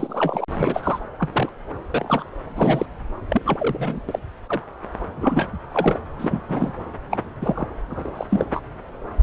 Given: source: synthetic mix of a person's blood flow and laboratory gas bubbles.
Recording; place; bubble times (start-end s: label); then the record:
Doppler ultrasound of blood flow; subclavian vein
0.00-0.45 s: bubbles
0.58-0.99 s: bubbles
1.19-1.30 s: bubbles
1.32-1.49 s: bubbles
1.93-2.24 s: bubbles
2.56-2.86 s: bubbles
3.29-3.42 s: bubbles
3.44-4.00 s: bubbles
4.08-4.19 s: bubbles
4.46-4.60 s: bubbles
5.17-5.49 s: bubbles
5.71-5.99 s: bubbles
6.18-6.42 s: bubbles
6.48-6.72 s: bubbles
7.10-7.18 s: bubbles
7.42-7.66 s: bubbles
7.90-8.27 s: bubbles
8.30-8.45 s: bubbles
8.53-8.61 s: bubbles
From the record:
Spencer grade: 3 (all of the cardiac periods contain showers or single bubble signals, but not dominating or overriding the cardiac motion signals); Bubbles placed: anywhere in the cardiac cycle